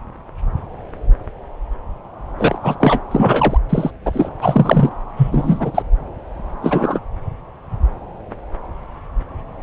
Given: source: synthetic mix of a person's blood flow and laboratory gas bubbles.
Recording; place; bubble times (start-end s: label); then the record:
Doppler ultrasound of blood flow; subclavian vein
2.38-2.58 s: bubbles
2.62-2.76 s: bubbles
2.80-3.01 s: bubbles
3.11-3.58 s: bubbles
3.69-3.90 s: bubbles
4.05-4.29 s: bubbles
4.42-4.90 s: bubbles
5.17-5.83 s: bubbles
6.62-7.00 s: bubbles
From the record:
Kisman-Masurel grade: 223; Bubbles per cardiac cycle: several, 3 to 8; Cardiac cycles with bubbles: 10 to 50%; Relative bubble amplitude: loud (0.450 to 0.775); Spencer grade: 2 (many but less than half of the cardiac periods contain bubble signals, singularly or in groups); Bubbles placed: anywhere in the cardiac cycle